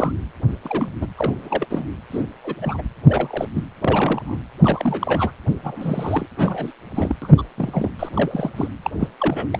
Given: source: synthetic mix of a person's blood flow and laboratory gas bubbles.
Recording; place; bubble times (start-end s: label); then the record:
Doppler ultrasound of blood flow; precordium
0.00-0.12 s: bubbles
0.64-0.89 s: bubbles
1.01-1.07 s: bubbles
1.17-1.66 s: bubbles
1.70-1.88 s: bubbles
2.11-2.25 s: bubbles
2.44-2.81 s: bubbles
3.06-3.47 s: bubbles
3.54-3.63 s: bubbles
3.81-4.43 s: bubbles
4.59-5.31 s: bubbles
5.64-6.26 s: bubbles
6.37-6.73 s: bubbles
6.95-7.15 s: bubbles
7.22-7.34 s: bubbles
7.38-7.43 s: bubbles
7.58-7.91 s: bubbles
7.99-8.09 s: bubbles
8.16-8.51 s: bubbles
8.56-8.68 s: bubbles
8.83-8.91 s: bubbles
9.00-9.08 s: bubbles
9.20-9.47 s: bubbles
9.53-9.60 s: bubbles
From the record:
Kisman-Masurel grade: 242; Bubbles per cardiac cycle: several, 3 to 8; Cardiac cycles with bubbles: 100%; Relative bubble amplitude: moderate (0.250 to 0.450); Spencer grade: 3 (all of the cardiac periods contain showers or single bubble signals, but not dominating or overriding the cardiac motion signals); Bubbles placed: anywhere in the cardiac cycle